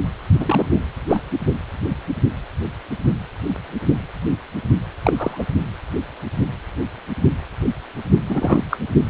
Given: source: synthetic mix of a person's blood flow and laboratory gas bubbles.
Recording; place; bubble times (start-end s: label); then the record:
Doppler ultrasound of blood flow; precordium
0.40-0.66 s: bubbles
0.71-0.80 s: bubbles
1.09-1.23 s: bubbles
5.03-5.43 s: bubbles
8.29-8.64 s: bubbles
8.70-8.77 s: bubbles
From the record:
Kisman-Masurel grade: 223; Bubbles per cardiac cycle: several, 3 to 8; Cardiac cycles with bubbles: 10 to 50%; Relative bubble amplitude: loud (0.450 to 0.775); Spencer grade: 2 (many but less than half of the cardiac periods contain bubble signals, singularly or in groups); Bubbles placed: only in the low amplitude regions of the cardiac cycle